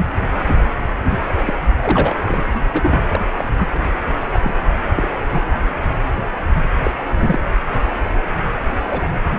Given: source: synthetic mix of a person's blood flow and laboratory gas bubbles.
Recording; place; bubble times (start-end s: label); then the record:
Doppler ultrasound of blood flow; precordium
1.09-1.18 s: bubbles
1.40-1.57 s: bubbles
1.81-2.17 s: bubbles
2.21-2.43 s: bubbles
2.55-2.60 s: bubbles
2.72-3.05 s: bubbles
3.08-3.21 s: bubbles
3.38-3.53 s: bubbles
3.58-3.68 s: bubbles
3.74-3.90 s: bubbles
4.33-4.54 s: bubbles
4.96-5.09 s: bubbles
5.30-5.58 s: bubbles
6.84-6.90 s: bubbles
7.18-7.39 s: bubbles
8.86-9.07 s: bubbles
From the record:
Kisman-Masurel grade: 232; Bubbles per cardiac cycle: several, 3 to 8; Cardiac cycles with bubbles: 50 to 99%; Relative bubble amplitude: moderate (0.250 to 0.450); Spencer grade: 3 (all of the cardiac periods contain showers or single bubble signals, but not dominating or overriding the cardiac motion signals); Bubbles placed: anywhere in the cardiac cycle